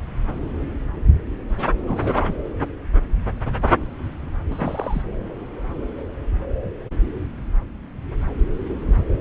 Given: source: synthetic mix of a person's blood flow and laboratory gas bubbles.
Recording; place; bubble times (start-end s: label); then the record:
Doppler ultrasound of blood flow; subclavian vein
1.81-2.34 s: bubbles
4.49-5.02 s: bubbles
From the record:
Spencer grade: 1 (occasional bubble signal discernible with the cardiac motion signal, with majority of cardiac periods free of bubbles); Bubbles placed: anywhere in the cardiac cycle